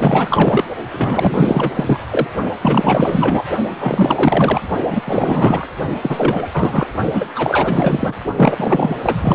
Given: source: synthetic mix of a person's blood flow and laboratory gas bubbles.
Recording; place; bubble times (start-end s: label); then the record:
Doppler ultrasound of blood flow; precordium
0.00-0.64 s: bubbles
0.93-2.00 s: bubbles
2.10-2.27 s: bubbles
2.62-3.45 s: bubbles
3.70-4.61 s: bubbles
4.89-5.02 s: bubbles
5.04-5.67 s: bubbles
6.01-6.87 s: bubbles
7.13-7.25 s: bubbles
7.35-8.15 s: bubbles
8.36-8.96 s: bubbles
9.03-9.35 s: bubbles
From the record:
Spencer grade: 4 (maximum detectable bubble signal sounding continuously throughout systole and diastole of every cardiac period, and overriding the amplitude of the normal cardiac signals); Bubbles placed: only in the low amplitude regions of the cardiac cycle